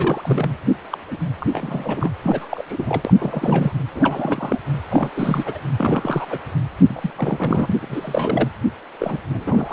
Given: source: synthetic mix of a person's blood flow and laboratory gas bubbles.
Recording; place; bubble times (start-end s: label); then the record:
Doppler ultrasound of blood flow; precordium
0.00-0.50 s: bubbles
0.90-0.98 s: bubbles
1.11-1.17 s: bubbles
1.40-2.09 s: bubbles
2.22-2.63 s: bubbles
2.68-3.13 s: bubbles
3.19-3.72 s: bubbles
3.94-4.59 s: bubbles
4.88-5.09 s: bubbles
5.17-5.58 s: bubbles
5.77-6.38 s: bubbles
6.78-7.10 s: bubbles
7.16-7.75 s: bubbles
7.81-8.49 s: bubbles
9.00-9.18 s: bubbles
9.28-9.73 s: bubbles
From the record:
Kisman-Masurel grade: 342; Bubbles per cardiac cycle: rolling drumbeat, 9 or more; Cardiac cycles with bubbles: 100%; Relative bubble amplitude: moderate (0.250 to 0.450); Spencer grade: 3 (all of the cardiac periods contain showers or single bubble signals, but not dominating or overriding the cardiac motion signals); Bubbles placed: anywhere in the cardiac cycle